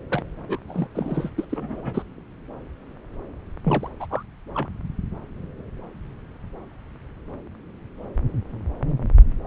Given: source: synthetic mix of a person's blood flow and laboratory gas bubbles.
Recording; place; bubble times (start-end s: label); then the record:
Doppler ultrasound of blood flow; subclavian vein
0.10-0.22 s: bubbles
0.48-0.58 s: bubbles
0.68-0.88 s: bubbles
0.95-1.29 s: bubbles
1.38-1.45 s: bubbles
1.49-2.03 s: bubbles
3.65-3.88 s: bubbles
4.00-4.07 s: bubbles
4.10-4.22 s: bubbles
4.54-4.67 s: bubbles
From the record:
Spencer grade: 2 (many but less than half of the cardiac periods contain bubble signals, singularly or in groups); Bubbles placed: anywhere in the cardiac cycle